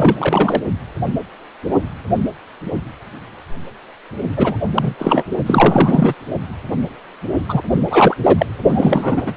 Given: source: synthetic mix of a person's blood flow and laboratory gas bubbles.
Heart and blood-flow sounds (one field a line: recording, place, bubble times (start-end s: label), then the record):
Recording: Doppler ultrasound of blood flow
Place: precordium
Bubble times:
0.00-0.62 s: bubbles
4.37-4.57 s: bubbles
4.74-4.95 s: bubbles
4.99-5.24 s: bubbles
5.46-6.14 s: bubbles
7.48-7.62 s: bubbles
7.71-8.17 s: bubbles
8.23-8.46 s: bubbles
8.70-9.36 s: bubbles
From the record:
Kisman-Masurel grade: 333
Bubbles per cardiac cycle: rolling drumbeat, 9 or more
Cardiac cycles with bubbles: 50 to 99%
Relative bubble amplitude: loud (0.450 to 0.775)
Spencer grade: 3 (all of the cardiac periods contain showers or single bubble signals, but not dominating or overriding the cardiac motion signals)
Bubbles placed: only in the low amplitude regions of the cardiac cycle